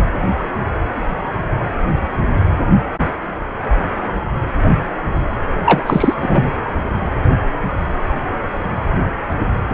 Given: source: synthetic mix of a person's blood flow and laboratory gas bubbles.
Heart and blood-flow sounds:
Doppler ultrasound of blood flow; precordium
5.65-6.14 s: bubbles
6.21-6.50 s: bubbles
From the record:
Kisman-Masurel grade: 213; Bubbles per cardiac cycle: several, 3 to 8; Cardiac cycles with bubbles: 1 to 10%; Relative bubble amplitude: loud (0.450 to 0.775); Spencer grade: 1 (occasional bubble signal discernible with the cardiac motion signal, with majority of cardiac periods free of bubbles); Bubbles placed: anywhere in the cardiac cycle

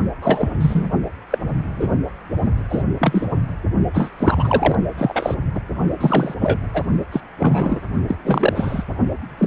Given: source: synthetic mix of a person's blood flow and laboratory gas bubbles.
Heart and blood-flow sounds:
Doppler ultrasound of blood flow; precordium
0.22-0.49 s: bubbles
0.60-0.90 s: bubbles
1.30-1.38 s: bubbles
1.77-1.88 s: bubbles
2.69-2.83 s: bubbles
3.00-3.27 s: bubbles
3.94-4.10 s: bubbles
4.18-4.75 s: bubbles
4.97-5.35 s: bubbles
5.54-5.61 s: bubbles
6.00-6.34 s: bubbles
6.40-6.60 s: bubbles
6.73-6.83 s: bubbles
7.12-7.21 s: bubbles
7.38-7.80 s: bubbles
8.07-8.15 s: bubbles
8.24-8.84 s: bubbles
9.38-9.47 s: bubbles
From the record:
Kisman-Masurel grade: 243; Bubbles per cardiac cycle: several, 3 to 8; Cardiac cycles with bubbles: 100%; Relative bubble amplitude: loud (0.450 to 0.775); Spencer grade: 3 (all of the cardiac periods contain showers or single bubble signals, but not dominating or overriding the cardiac motion signals); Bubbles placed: only in the low amplitude regions of the cardiac cycle

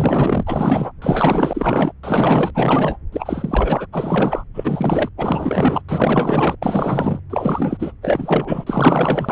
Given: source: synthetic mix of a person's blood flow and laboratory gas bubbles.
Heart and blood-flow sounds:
Doppler ultrasound of blood flow; subclavian vein
0.00-0.43 s: bubbles
0.46-0.92 s: bubbles
1.02-1.92 s: bubbles
2.03-2.50 s: bubbles
2.54-2.96 s: bubbles
3.12-3.86 s: bubbles
3.92-4.44 s: bubbles
4.54-5.12 s: bubbles
5.18-5.81 s: bubbles
5.88-6.55 s: bubbles
6.62-7.20 s: bubbles
7.29-7.92 s: bubbles
8.01-8.64 s: bubbles
8.66-9.32 s: bubbles
From the record:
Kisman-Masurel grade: 444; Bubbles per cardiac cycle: continuous sound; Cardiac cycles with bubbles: 100%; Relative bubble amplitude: maximal (0.775 to 0.999); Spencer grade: 4 (maximum detectable bubble signal sounding continuously throughout systole and diastole of every cardiac period, and overriding the amplitude of the normal cardiac signals); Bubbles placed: anywhere in the cardiac cycle

